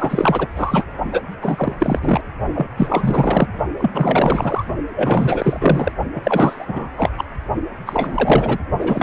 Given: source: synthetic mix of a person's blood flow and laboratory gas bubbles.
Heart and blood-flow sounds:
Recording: Doppler ultrasound of blood flow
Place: precordium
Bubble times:
0.00-0.47 s: bubbles
0.56-0.84 s: bubbles
1.11-1.22 s: bubbles
1.42-1.75 s: bubbles
1.78-2.21 s: bubbles
2.54-2.67 s: bubbles
2.76-3.47 s: bubbles
3.79-4.64 s: bubbles
4.92-5.92 s: bubbles
6.14-6.90 s: bubbles
6.97-7.11 s: bubbles
7.17-7.25 s: bubbles
7.86-8.58 s: bubbles
8.80-9.03 s: bubbles
From the record:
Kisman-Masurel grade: 444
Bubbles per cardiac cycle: continuous sound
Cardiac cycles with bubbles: 100%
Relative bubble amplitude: maximal (0.775 to 0.999)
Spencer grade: 4 (maximum detectable bubble signal sounding continuously throughout systole and diastole of every cardiac period, and overriding the amplitude of the normal cardiac signals)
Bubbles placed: only in the low amplitude regions of the cardiac cycle

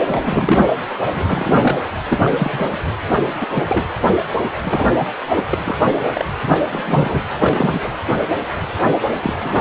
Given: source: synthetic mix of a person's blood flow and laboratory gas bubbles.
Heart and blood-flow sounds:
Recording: Doppler ultrasound of blood flow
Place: precordium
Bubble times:
0.07-0.64 s: bubbles
1.12-1.78 s: bubbles
2.08-2.67 s: bubbles
3.41-3.46 s: bubbles
3.54-3.63 s: bubbles
3.69-3.84 s: bubbles
4.63-4.87 s: bubbles
4.98-5.08 s: bubbles
5.37-5.42 s: bubbles
5.50-5.59 s: bubbles
5.64-5.76 s: bubbles
5.85-5.94 s: bubbles
6.09-6.25 s: bubbles
6.46-6.58 s: bubbles
6.71-7.21 s: bubbles
7.38-7.90 s: bubbles
8.81-8.91 s: bubbles
9.22-9.34 s: bubbles
9.39-9.61 s: bubbles
From the record:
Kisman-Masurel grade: 242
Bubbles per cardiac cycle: several, 3 to 8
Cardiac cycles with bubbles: 100%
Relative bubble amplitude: moderate (0.250 to 0.450)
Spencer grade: 3 (all of the cardiac periods contain showers or single bubble signals, but not dominating or overriding the cardiac motion signals)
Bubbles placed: anywhere in the cardiac cycle

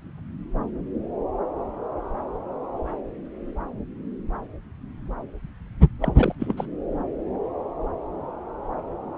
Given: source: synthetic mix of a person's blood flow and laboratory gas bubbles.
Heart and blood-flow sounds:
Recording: Doppler ultrasound of blood flow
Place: subclavian vein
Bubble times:
6.02-6.35 s: bubbles
6.39-6.66 s: bubbles
From the record:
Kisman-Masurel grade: 211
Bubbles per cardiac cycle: several, 3 to 8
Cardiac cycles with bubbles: 1 to 10%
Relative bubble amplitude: barely perceptible (0.100 to 0.250)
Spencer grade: 1 (occasional bubble signal discernible with the cardiac motion signal, with majority of cardiac periods free of bubbles)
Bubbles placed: anywhere in the cardiac cycle

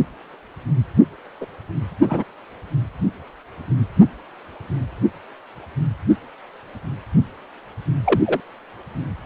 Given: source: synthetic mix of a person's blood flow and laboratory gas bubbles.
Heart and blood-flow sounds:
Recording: Doppler ultrasound of blood flow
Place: precordium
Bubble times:
1.41-1.46 s: bubbles
2.02-2.24 s: bubbles
8.04-8.21 s: bubbles
8.26-8.40 s: bubbles
From the record:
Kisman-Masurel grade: 122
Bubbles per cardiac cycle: 1 to 2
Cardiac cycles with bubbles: 10 to 50%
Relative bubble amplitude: moderate (0.250 to 0.450)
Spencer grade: 2 (many but less than half of the cardiac periods contain bubble signals, singularly or in groups)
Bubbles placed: only in the low amplitude regions of the cardiac cycle

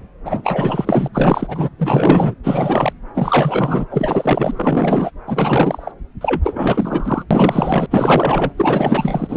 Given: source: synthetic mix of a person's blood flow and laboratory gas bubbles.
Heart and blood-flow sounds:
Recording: Doppler ultrasound of blood flow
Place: subclavian vein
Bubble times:
0.24-1.08 s: bubbles
1.13-1.70 s: bubbles
1.78-2.34 s: bubbles
2.43-2.93 s: bubbles
3.15-3.85 s: bubbles
3.90-5.12 s: bubbles
5.27-5.92 s: bubbles
6.21-7.23 s: bubbles
7.31-7.86 s: bubbles
7.91-8.52 s: bubbles
8.57-9.37 s: bubbles
From the record:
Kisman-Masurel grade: 444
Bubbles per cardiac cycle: continuous sound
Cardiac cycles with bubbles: 100%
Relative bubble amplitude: maximal (0.775 to 0.999)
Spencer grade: 4 (maximum detectable bubble signal sounding continuously throughout systole and diastole of every cardiac period, and overriding the amplitude of the normal cardiac signals)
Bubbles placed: anywhere in the cardiac cycle

